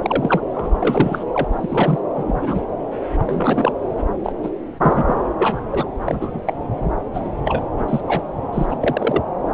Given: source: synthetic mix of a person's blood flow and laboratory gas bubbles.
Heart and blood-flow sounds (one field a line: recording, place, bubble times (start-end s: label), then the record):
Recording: Doppler ultrasound of blood flow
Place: subclavian vein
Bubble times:
0.02-0.40 s: bubbles
0.54-1.24 s: bubbles
1.32-1.99 s: bubbles
2.15-2.65 s: bubbles
3.18-3.72 s: bubbles
4.23-4.33 s: bubbles
4.43-4.50 s: bubbles
4.78-5.04 s: bubbles
5.07-5.15 s: bubbles
5.38-5.60 s: bubbles
5.71-5.88 s: bubbles
6.04-6.40 s: bubbles
6.46-6.54 s: bubbles
7.14-7.21 s: bubbles
7.24-7.30 s: bubbles
7.45-7.63 s: bubbles
7.78-8.01 s: bubbles
8.08-8.22 s: bubbles
8.53-8.77 s: bubbles
8.80-9.21 s: bubbles
9.52-9.54 s: bubbles
From the record:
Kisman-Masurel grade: 243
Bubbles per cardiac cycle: several, 3 to 8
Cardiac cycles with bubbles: 100%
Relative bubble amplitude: loud (0.450 to 0.775)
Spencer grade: 3 (all of the cardiac periods contain showers or single bubble signals, but not dominating or overriding the cardiac motion signals)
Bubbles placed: anywhere in the cardiac cycle